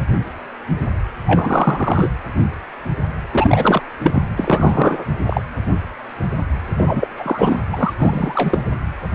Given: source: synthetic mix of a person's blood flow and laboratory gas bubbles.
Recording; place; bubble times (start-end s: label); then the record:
Doppler ultrasound of blood flow; precordium
1.25-2.09 s: bubbles
3.33-3.81 s: bubbles
4.04-4.22 s: bubbles
4.37-5.05 s: bubbles
5.26-5.42 s: bubbles
6.77-7.08 s: bubbles
7.17-7.59 s: bubbles
7.72-7.93 s: bubbles
7.96-8.59 s: bubbles
From the record:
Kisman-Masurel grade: 333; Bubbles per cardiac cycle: rolling drumbeat, 9 or more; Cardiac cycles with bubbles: 50 to 99%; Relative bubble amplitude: loud (0.450 to 0.775); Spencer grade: 3 (all of the cardiac periods contain showers or single bubble signals, but not dominating or overriding the cardiac motion signals); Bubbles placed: anywhere in the cardiac cycle